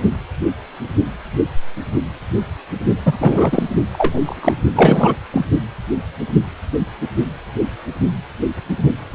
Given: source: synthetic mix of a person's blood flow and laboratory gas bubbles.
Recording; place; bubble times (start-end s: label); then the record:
Doppler ultrasound of blood flow; precordium
3.05-3.16 s: bubbles
3.18-3.63 s: bubbles
3.92-4.20 s: bubbles
4.24-4.61 s: bubbles
4.75-5.16 s: bubbles
5.33-5.45 s: bubbles
From the record:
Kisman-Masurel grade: 223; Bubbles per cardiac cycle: several, 3 to 8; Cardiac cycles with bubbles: 10 to 50%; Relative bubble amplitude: loud (0.450 to 0.775); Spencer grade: 2 (many but less than half of the cardiac periods contain bubble signals, singularly or in groups); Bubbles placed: only in the low amplitude regions of the cardiac cycle